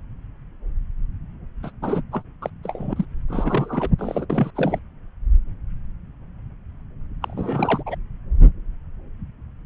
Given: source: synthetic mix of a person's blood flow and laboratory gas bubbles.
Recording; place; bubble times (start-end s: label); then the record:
Doppler ultrasound of blood flow; subclavian vein
1.63-1.70 s: bubbles
1.82-2.02 s: bubbles
2.12-2.22 s: bubbles
2.42-2.50 s: bubbles
2.63-2.94 s: bubbles
2.96-3.05 s: bubbles
3.29-3.90 s: bubbles
3.98-4.25 s: bubbles
4.29-4.51 s: bubbles
4.55-4.79 s: bubbles
7.22-7.83 s: bubbles
7.86-7.96 s: bubbles
From the record:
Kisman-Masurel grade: 332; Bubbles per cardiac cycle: rolling drumbeat, 9 or more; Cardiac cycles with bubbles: 50 to 99%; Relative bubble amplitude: moderate (0.250 to 0.450); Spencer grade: 3 (all of the cardiac periods contain showers or single bubble signals, but not dominating or overriding the cardiac motion signals); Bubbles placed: anywhere in the cardiac cycle